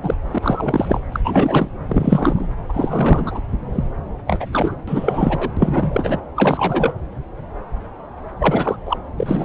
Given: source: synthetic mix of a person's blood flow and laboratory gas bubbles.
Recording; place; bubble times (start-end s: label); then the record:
Doppler ultrasound of blood flow; subclavian vein
0.02-0.15 s: bubbles
0.31-0.39 s: bubbles
0.42-1.03 s: bubbles
1.12-1.20 s: bubbles
1.24-1.69 s: bubbles
1.89-2.48 s: bubbles
2.69-3.41 s: bubbles
3.72-3.84 s: bubbles
4.27-4.46 s: bubbles
4.52-4.75 s: bubbles
4.88-5.50 s: bubbles
5.57-6.19 s: bubbles
6.36-6.93 s: bubbles
8.38-8.76 s: bubbles
8.85-8.97 s: bubbles
9.17-9.45 s: bubbles
From the record:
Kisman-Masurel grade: 333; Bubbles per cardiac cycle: rolling drumbeat, 9 or more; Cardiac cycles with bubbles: 50 to 99%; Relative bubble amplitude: loud (0.450 to 0.775); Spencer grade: 3 (all of the cardiac periods contain showers or single bubble signals, but not dominating or overriding the cardiac motion signals); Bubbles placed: anywhere in the cardiac cycle